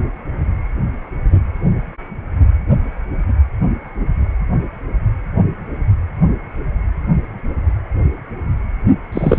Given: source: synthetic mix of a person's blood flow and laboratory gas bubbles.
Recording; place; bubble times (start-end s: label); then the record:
Doppler ultrasound of blood flow; precordium
9.12-9.39 s: bubbles
From the record:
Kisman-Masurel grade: 113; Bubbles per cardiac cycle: 1 to 2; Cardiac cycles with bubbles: 1 to 10%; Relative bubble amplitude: loud (0.450 to 0.775); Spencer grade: 1 (occasional bubble signal discernible with the cardiac motion signal, with majority of cardiac periods free of bubbles); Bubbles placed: anywhere in the cardiac cycle